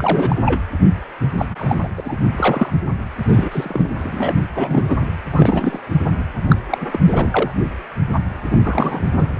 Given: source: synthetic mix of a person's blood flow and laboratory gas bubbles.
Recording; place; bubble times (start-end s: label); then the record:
Doppler ultrasound of blood flow; precordium
0.00-0.36 s: bubbles
0.45-0.61 s: bubbles
1.20-1.27 s: bubbles
1.38-1.45 s: bubbles
1.58-1.79 s: bubbles
1.83-1.89 s: bubbles
1.97-2.19 s: bubbles
2.33-2.72 s: bubbles
3.28-3.94 s: bubbles
3.98-4.35 s: bubbles
4.55-4.99 s: bubbles
5.02-5.09 s: bubbles
5.32-5.79 s: bubbles
6.00-6.23 s: bubbles
6.49-6.55 s: bubbles
6.70-6.78 s: bubbles
6.80-6.87 s: bubbles
6.91-7.51 s: bubbles
8.46-8.59 s: bubbles
8.63-9.08 s: bubbles
9.19-9.27 s: bubbles
From the record:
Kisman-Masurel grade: 333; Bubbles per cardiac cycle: rolling drumbeat, 9 or more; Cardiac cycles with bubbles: 50 to 99%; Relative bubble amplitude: loud (0.450 to 0.775); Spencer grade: 3 (all of the cardiac periods contain showers or single bubble signals, but not dominating or overriding the cardiac motion signals); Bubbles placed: anywhere in the cardiac cycle